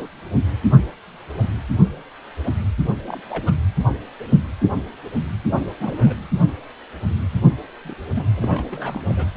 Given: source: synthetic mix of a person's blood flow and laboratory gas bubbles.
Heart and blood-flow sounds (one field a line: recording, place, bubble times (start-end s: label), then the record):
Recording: Doppler ultrasound of blood flow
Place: precordium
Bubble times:
0.00-0.09 s: bubbles
3.04-3.21 s: bubbles
3.29-3.53 s: bubbles
5.46-5.66 s: bubbles
5.80-6.15 s: bubbles
7.85-7.95 s: bubbles
8.15-8.24 s: bubbles
8.36-9.02 s: bubbles
9.06-9.26 s: bubbles
From the record:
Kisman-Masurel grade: 221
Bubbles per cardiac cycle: several, 3 to 8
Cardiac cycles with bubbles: 10 to 50%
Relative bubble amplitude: barely perceptible (0.100 to 0.250)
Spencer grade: 2 (many but less than half of the cardiac periods contain bubble signals, singularly or in groups)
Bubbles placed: anywhere in the cardiac cycle